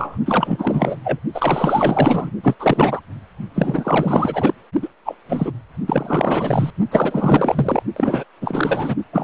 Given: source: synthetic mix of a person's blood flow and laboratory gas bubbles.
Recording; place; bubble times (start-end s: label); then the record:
Doppler ultrasound of blood flow; precordium
0.00-0.18 s: bubbles
0.25-0.97 s: bubbles
1.03-1.19 s: bubbles
1.32-2.31 s: bubbles
2.43-2.55 s: bubbles
2.59-3.00 s: bubbles
3.54-4.54 s: bubbles
4.82-4.88 s: bubbles
5.04-5.15 s: bubbles
5.29-5.51 s: bubbles
5.87-6.71 s: bubbles
6.91-7.83 s: bubbles
7.96-8.23 s: bubbles
8.41-8.96 s: bubbles
9.12-9.24 s: bubbles
From the record:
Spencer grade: 4 (maximum detectable bubble signal sounding continuously throughout systole and diastole of every cardiac period, and overriding the amplitude of the normal cardiac signals); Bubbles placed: only in the low amplitude regions of the cardiac cycle